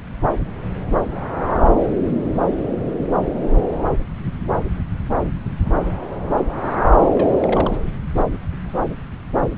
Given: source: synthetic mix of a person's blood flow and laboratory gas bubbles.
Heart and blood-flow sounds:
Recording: Doppler ultrasound of blood flow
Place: subclavian vein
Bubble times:
7.04-7.71 s: bubbles
From the record:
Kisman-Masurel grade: 111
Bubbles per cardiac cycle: 1 to 2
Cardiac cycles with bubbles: 1 to 10%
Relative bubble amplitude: barely perceptible (0.100 to 0.250)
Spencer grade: 1 (occasional bubble signal discernible with the cardiac motion signal, with majority of cardiac periods free of bubbles)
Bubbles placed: anywhere in the cardiac cycle

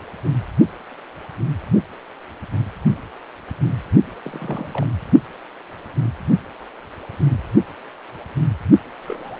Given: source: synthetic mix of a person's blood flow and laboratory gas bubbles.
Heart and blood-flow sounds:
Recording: Doppler ultrasound of blood flow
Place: precordium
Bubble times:
4.24-4.91 s: bubbles
9.01-9.40 s: bubbles
From the record:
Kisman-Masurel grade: 221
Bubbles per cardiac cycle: several, 3 to 8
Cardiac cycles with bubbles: 10 to 50%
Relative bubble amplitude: barely perceptible (0.100 to 0.250)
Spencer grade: 2 (many but less than half of the cardiac periods contain bubble signals, singularly or in groups)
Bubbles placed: only in the low amplitude regions of the cardiac cycle

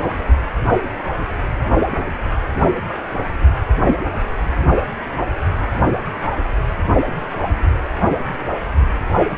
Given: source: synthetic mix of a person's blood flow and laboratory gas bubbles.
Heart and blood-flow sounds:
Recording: Doppler ultrasound of blood flow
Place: precordium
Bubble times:
0.17-0.24 s: bubbles
From the record:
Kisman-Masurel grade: 111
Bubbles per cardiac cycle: 1 to 2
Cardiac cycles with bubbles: 1 to 10%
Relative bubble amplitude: barely perceptible (0.100 to 0.250)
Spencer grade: 1 (occasional bubble signal discernible with the cardiac motion signal, with majority of cardiac periods free of bubbles)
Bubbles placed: only in the low amplitude regions of the cardiac cycle

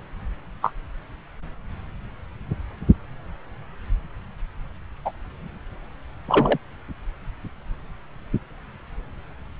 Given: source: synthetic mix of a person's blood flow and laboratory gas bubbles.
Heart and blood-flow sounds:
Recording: Doppler ultrasound of blood flow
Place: subclavian vein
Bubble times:
0.62-0.72 s: bubbles
5.04-5.12 s: bubbles
6.28-6.58 s: bubbles
From the record:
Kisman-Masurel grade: 123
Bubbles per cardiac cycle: 1 to 2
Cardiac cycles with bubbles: 10 to 50%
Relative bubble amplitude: loud (0.450 to 0.775)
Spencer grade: 2 (many but less than half of the cardiac periods contain bubble signals, singularly or in groups)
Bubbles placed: anywhere in the cardiac cycle

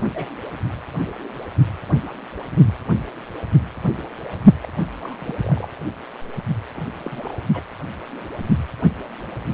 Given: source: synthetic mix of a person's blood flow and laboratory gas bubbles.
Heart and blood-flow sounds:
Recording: Doppler ultrasound of blood flow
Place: precordium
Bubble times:
0.14-0.31 s: bubbles
4.62-4.68 s: bubbles
5.00-5.16 s: bubbles
5.20-5.35 s: bubbles
5.41-5.68 s: bubbles
6.74-6.81 s: bubbles
6.97-7.45 s: bubbles
7.54-7.63 s: bubbles
From the record:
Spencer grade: 2 (many but less than half of the cardiac periods contain bubble signals, singularly or in groups)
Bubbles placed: anywhere in the cardiac cycle

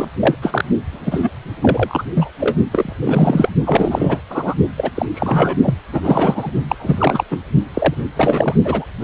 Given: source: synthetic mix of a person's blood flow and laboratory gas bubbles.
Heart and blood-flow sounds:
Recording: Doppler ultrasound of blood flow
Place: precordium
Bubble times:
0.00-0.09 s: bubbles
0.19-0.35 s: bubbles
0.42-0.65 s: bubbles
0.92-1.31 s: bubbles
1.61-2.04 s: bubbles
2.15-2.31 s: bubbles
2.40-2.56 s: bubbles
2.73-2.93 s: bubbles
3.02-3.50 s: bubbles
3.66-4.21 s: bubbles
4.29-4.54 s: bubbles
4.77-4.92 s: bubbles
4.95-5.06 s: bubbles
5.14-5.56 s: bubbles
5.62-5.74 s: bubbles
5.92-6.51 s: bubbles
6.68-6.75 s: bubbles
6.79-7.24 s: bubbles
7.30-7.38 s: bubbles
7.73-7.95 s: bubbles
8.16-8.54 s: bubbles
8.64-8.85 s: bubbles
9.01-9.04 s: bubbles
From the record:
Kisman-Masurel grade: 343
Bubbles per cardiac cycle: rolling drumbeat, 9 or more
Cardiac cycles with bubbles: 100%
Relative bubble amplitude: loud (0.450 to 0.775)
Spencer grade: 3 (all of the cardiac periods contain showers or single bubble signals, but not dominating or overriding the cardiac motion signals)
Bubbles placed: only in the low amplitude regions of the cardiac cycle

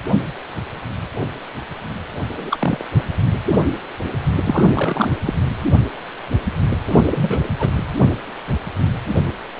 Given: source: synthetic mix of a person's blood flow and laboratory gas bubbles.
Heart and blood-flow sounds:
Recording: Doppler ultrasound of blood flow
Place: precordium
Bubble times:
2.29-2.84 s: bubbles
4.43-4.70 s: bubbles
4.74-5.12 s: bubbles
5.25-5.34 s: bubbles
6.86-7.44 s: bubbles
7.59-7.70 s: bubbles
From the record:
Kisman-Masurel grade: 222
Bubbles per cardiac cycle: several, 3 to 8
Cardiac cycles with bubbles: 10 to 50%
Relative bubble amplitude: moderate (0.250 to 0.450)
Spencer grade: 2 (many but less than half of the cardiac periods contain bubble signals, singularly or in groups)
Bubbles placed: anywhere in the cardiac cycle

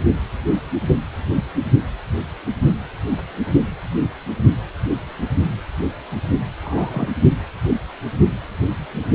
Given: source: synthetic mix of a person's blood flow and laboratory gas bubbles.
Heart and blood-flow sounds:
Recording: Doppler ultrasound of blood flow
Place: precordium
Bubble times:
6.62-7.08 s: bubbles
From the record:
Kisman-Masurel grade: 122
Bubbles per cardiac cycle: 1 to 2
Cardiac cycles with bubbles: 10 to 50%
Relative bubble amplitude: moderate (0.250 to 0.450)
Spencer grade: 2 (many but less than half of the cardiac periods contain bubble signals, singularly or in groups)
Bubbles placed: only in the low amplitude regions of the cardiac cycle

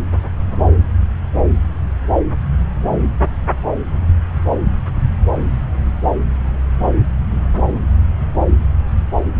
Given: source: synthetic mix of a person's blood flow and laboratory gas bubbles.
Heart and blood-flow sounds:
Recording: Doppler ultrasound of blood flow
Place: subclavian vein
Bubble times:
no bubbles
From the record:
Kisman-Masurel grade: 000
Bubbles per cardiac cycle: 0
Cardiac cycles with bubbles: 0%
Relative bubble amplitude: no bubbles discernible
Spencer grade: 0 (complete lack of bubble signals)

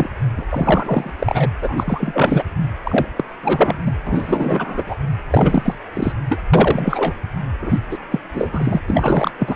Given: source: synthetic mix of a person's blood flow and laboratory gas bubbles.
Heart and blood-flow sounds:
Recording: Doppler ultrasound of blood flow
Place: precordium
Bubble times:
0.00-0.10 s: bubbles
0.37-0.43 s: bubbles
0.50-1.10 s: bubbles
1.19-1.49 s: bubbles
1.62-2.43 s: bubbles
2.83-3.08 s: bubbles
3.16-3.24 s: bubbles
3.42-3.77 s: bubbles
3.86-3.93 s: bubbles
4.06-4.84 s: bubbles
4.86-4.96 s: bubbles
5.30-5.78 s: bubbles
5.93-6.12 s: bubbles
6.28-6.40 s: bubbles
6.53-7.13 s: bubbles
7.61-7.78 s: bubbles
7.91-7.98 s: bubbles
8.11-8.20 s: bubbles
8.33-8.80 s: bubbles
8.87-9.31 s: bubbles
9.38-9.56 s: bubbles
From the record:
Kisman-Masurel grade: 343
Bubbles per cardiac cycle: rolling drumbeat, 9 or more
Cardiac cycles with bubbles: 100%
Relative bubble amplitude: loud (0.450 to 0.775)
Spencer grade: 3 (all of the cardiac periods contain showers or single bubble signals, but not dominating or overriding the cardiac motion signals)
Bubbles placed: anywhere in the cardiac cycle

